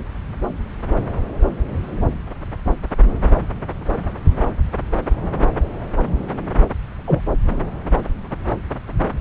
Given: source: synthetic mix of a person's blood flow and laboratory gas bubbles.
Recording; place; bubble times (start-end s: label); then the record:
Doppler ultrasound of blood flow; subclavian vein
7.07-7.21 s: bubbles
From the record:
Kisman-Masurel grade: 113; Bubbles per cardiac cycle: 1 to 2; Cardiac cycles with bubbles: 1 to 10%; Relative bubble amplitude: loud (0.450 to 0.775); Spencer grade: 1 (occasional bubble signal discernible with the cardiac motion signal, with majority of cardiac periods free of bubbles); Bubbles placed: anywhere in the cardiac cycle